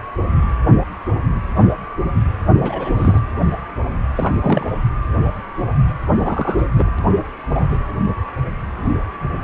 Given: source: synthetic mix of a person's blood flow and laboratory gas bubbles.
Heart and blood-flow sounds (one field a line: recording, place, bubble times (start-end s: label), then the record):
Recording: Doppler ultrasound of blood flow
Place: precordium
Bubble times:
2.56-2.93 s: bubbles
2.96-3.21 s: bubbles
4.16-4.71 s: bubbles
6.19-6.65 s: bubbles
6.75-6.90 s: bubbles
6.99-7.01 s: bubbles
7.51-7.76 s: bubbles
From the record:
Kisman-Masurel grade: 222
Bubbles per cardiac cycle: several, 3 to 8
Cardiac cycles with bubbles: 10 to 50%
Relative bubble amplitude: moderate (0.250 to 0.450)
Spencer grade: 2 (many but less than half of the cardiac periods contain bubble signals, singularly or in groups)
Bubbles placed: anywhere in the cardiac cycle